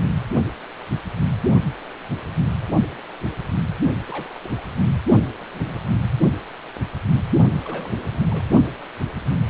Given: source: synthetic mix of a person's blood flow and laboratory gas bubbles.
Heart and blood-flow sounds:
Doppler ultrasound of blood flow; precordium
4.06-4.39 s: bubbles
4.43-4.48 s: bubbles
4.57-4.61 s: bubbles
5.40-5.43 s: bubbles
5.51-5.86 s: bubbles
7.64-8.24 s: bubbles
8.30-8.44 s: bubbles
From the record:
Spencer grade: 2 (many but less than half of the cardiac periods contain bubble signals, singularly or in groups); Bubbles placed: only in the low amplitude regions of the cardiac cycle

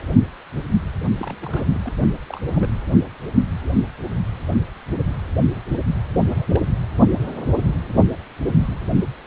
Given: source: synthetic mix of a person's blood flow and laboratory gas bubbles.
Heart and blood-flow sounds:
Doppler ultrasound of blood flow; precordium
1.19-1.92 s: bubbles
2.28-2.40 s: bubbles
2.48-2.75 s: bubbles
5.55-5.62 s: bubbles
6.19-6.60 s: bubbles
From the record:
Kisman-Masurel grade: 221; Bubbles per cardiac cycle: several, 3 to 8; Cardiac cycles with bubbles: 10 to 50%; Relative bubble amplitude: barely perceptible (0.100 to 0.250); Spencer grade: 2 (many but less than half of the cardiac periods contain bubble signals, singularly or in groups); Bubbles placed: only in the low amplitude regions of the cardiac cycle

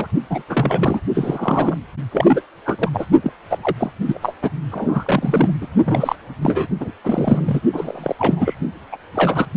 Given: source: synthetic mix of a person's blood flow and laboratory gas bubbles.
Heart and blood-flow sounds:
Doppler ultrasound of blood flow; precordium
0.00-0.08 s: bubbles
0.29-0.42 s: bubbles
0.48-1.00 s: bubbles
1.15-1.77 s: bubbles
2.11-2.42 s: bubbles
2.65-2.89 s: bubbles
2.93-3.05 s: bubbles
3.22-3.32 s: bubbles
3.49-3.58 s: bubbles
3.62-3.76 s: bubbles
3.78-3.91 s: bubbles
4.06-4.19 s: bubbles
4.22-4.33 s: bubbles
4.42-4.50 s: bubbles
4.71-5.54 s: bubbles
5.61-5.67 s: bubbles
5.85-6.16 s: bubbles
6.41-6.67 s: bubbles
6.80-6.91 s: bubbles
7.04-7.61 s: bubbles
7.73-8.16 s: bubbles
8.19-8.55 s: bubbles
8.92-8.96 s: bubbles
9.15-9.46 s: bubbles
From the record:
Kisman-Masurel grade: 342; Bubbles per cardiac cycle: rolling drumbeat, 9 or more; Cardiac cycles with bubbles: 100%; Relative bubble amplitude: moderate (0.250 to 0.450); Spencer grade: 3 (all of the cardiac periods contain showers or single bubble signals, but not dominating or overriding the cardiac motion signals); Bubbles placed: only in the low amplitude regions of the cardiac cycle

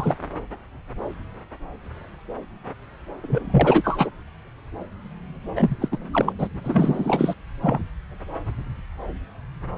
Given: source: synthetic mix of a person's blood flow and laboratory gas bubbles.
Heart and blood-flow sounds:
Doppler ultrasound of blood flow; subclavian vein
0.00-0.14 s: bubbles
3.22-4.10 s: bubbles
5.55-5.88 s: bubbles
5.92-5.97 s: bubbles
6.12-6.33 s: bubbles
6.38-6.48 s: bubbles
6.64-7.34 s: bubbles
7.63-7.79 s: bubbles
9.76-9.78 s: bubbles
From the record:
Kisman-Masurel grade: 332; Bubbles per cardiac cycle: rolling drumbeat, 9 or more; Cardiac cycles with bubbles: 50 to 99%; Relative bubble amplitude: moderate (0.250 to 0.450); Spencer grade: 3 (all of the cardiac periods contain showers or single bubble signals, but not dominating or overriding the cardiac motion signals); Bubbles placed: anywhere in the cardiac cycle

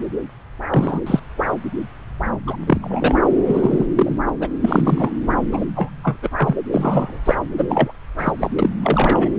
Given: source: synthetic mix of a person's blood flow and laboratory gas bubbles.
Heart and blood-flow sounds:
Doppler ultrasound of blood flow; subclavian vein
0.70-1.00 s: bubbles
1.06-1.19 s: bubbles
2.46-2.56 s: bubbles
2.67-2.78 s: bubbles
2.81-3.18 s: bubbles
3.47-3.85 s: bubbles
3.95-4.18 s: bubbles
4.27-4.30 s: bubbles
4.40-4.48 s: bubbles
4.60-5.12 s: bubbles
5.51-5.65 s: bubbles
5.75-5.90 s: bubbles
6.04-6.18 s: bubbles
6.22-6.29 s: bubbles
6.36-6.56 s: bubbles
6.73-7.19 s: bubbles
7.25-7.35 s: bubbles
7.58-7.92 s: bubbles
8.18-8.32 s: bubbles
8.38-8.50 s: bubbles
8.58-8.70 s: bubbles
8.83-9.28 s: bubbles
From the record:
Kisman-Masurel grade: 233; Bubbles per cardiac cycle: several, 3 to 8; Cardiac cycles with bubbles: 50 to 99%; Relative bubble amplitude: loud (0.450 to 0.775); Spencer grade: 3 (all of the cardiac periods contain showers or single bubble signals, but not dominating or overriding the cardiac motion signals); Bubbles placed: anywhere in the cardiac cycle

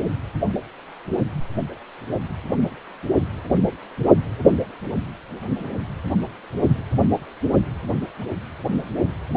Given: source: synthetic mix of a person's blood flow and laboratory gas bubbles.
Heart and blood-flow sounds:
Doppler ultrasound of blood flow; precordium
no bubbles
From the record:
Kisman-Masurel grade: 000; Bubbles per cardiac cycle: 0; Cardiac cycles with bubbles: 0%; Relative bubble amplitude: no bubbles discernible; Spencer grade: 0 (complete lack of bubble signals)

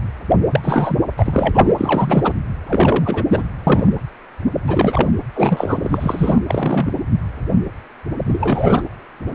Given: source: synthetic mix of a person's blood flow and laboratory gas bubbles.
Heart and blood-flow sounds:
Doppler ultrasound of blood flow; precordium
0.51-0.60 s: bubbles
0.62-0.98 s: bubbles
1.17-1.75 s: bubbles
1.78-2.33 s: bubbles
2.67-3.24 s: bubbles
3.29-3.44 s: bubbles
3.67-3.87 s: bubbles
4.67-5.11 s: bubbles
5.34-6.40 s: bubbles
6.48-6.94 s: bubbles
8.26-8.82 s: bubbles
From the record:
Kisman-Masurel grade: 333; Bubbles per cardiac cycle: rolling drumbeat, 9 or more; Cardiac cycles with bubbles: 50 to 99%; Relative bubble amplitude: loud (0.450 to 0.775); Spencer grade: 3 (all of the cardiac periods contain showers or single bubble signals, but not dominating or overriding the cardiac motion signals); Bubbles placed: anywhere in the cardiac cycle

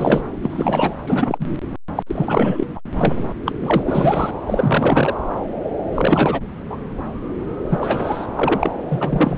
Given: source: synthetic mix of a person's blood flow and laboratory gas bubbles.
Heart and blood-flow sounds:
Doppler ultrasound of blood flow; subclavian vein
0.00-0.21 s: bubbles
0.42-0.95 s: bubbles
1.05-1.46 s: bubbles
1.95-2.03 s: bubbles
2.07-2.66 s: bubbles
2.75-2.80 s: bubbles
2.95-3.22 s: bubbles
3.46-3.51 s: bubbles
3.62-3.83 s: bubbles
3.88-4.31 s: bubbles
4.46-5.14 s: bubbles
5.94-6.41 s: bubbles
6.70-6.77 s: bubbles
7.69-8.27 s: bubbles
8.34-8.74 s: bubbles
8.88-9.37 s: bubbles
From the record:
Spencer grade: 3 (all of the cardiac periods contain showers or single bubble signals, but not dominating or overriding the cardiac motion signals); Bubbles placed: anywhere in the cardiac cycle

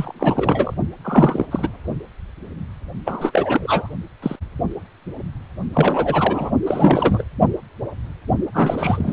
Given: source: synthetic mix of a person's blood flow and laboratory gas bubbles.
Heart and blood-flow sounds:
Doppler ultrasound of blood flow; precordium
0.00-0.74 s: bubbles
1.04-1.46 s: bubbles
1.51-1.69 s: bubbles
3.05-3.94 s: bubbles
4.22-4.36 s: bubbles
5.73-6.51 s: bubbles
6.65-7.24 s: bubbles
8.54-9.13 s: bubbles
From the record:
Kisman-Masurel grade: 333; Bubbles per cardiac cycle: rolling drumbeat, 9 or more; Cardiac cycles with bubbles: 50 to 99%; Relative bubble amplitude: loud (0.450 to 0.775); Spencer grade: 3 (all of the cardiac periods contain showers or single bubble signals, but not dominating or overriding the cardiac motion signals); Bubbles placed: only in the low amplitude regions of the cardiac cycle

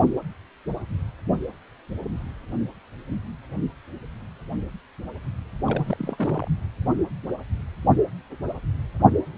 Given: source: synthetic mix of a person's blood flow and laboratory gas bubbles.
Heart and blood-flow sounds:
Doppler ultrasound of blood flow; precordium
5.66-6.48 s: bubbles
From the record:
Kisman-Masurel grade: 211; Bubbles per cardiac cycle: several, 3 to 8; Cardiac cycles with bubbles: 1 to 10%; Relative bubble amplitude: barely perceptible (0.100 to 0.250); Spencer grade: 1 (occasional bubble signal discernible with the cardiac motion signal, with majority of cardiac periods free of bubbles); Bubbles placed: only in the low amplitude regions of the cardiac cycle

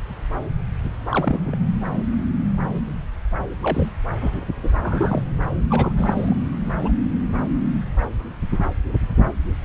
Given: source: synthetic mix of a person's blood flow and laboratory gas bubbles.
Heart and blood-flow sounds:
Doppler ultrasound of blood flow; subclavian vein
1.05-1.57 s: bubbles
3.62-3.92 s: bubbles
4.20-4.42 s: bubbles
4.63-4.70 s: bubbles
4.83-5.22 s: bubbles
5.70-5.92 s: bubbles
5.96-6.36 s: bubbles
6.81-6.91 s: bubbles
From the record:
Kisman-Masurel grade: 232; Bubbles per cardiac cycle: several, 3 to 8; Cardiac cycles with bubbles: 50 to 99%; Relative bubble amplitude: moderate (0.250 to 0.450); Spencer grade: 3 (all of the cardiac periods contain showers or single bubble signals, but not dominating or overriding the cardiac motion signals); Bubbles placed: anywhere in the cardiac cycle

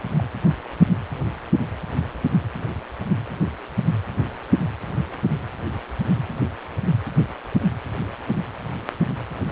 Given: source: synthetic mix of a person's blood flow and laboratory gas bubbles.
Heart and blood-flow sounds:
Doppler ultrasound of blood flow; precordium
0.14-0.24 s: bubbles
From the record:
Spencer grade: 1 (occasional bubble signal discernible with the cardiac motion signal, with majority of cardiac periods free of bubbles); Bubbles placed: anywhere in the cardiac cycle

